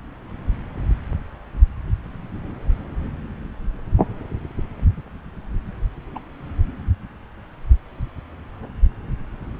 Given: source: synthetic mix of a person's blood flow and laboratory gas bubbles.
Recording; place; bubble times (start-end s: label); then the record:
Doppler ultrasound of blood flow; subclavian vein
6.15-6.19 s: bubbles
From the record:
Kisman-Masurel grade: 112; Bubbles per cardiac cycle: 1 to 2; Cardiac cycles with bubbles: 1 to 10%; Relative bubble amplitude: moderate (0.250 to 0.450); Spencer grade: 1 (occasional bubble signal discernible with the cardiac motion signal, with majority of cardiac periods free of bubbles); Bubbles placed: anywhere in the cardiac cycle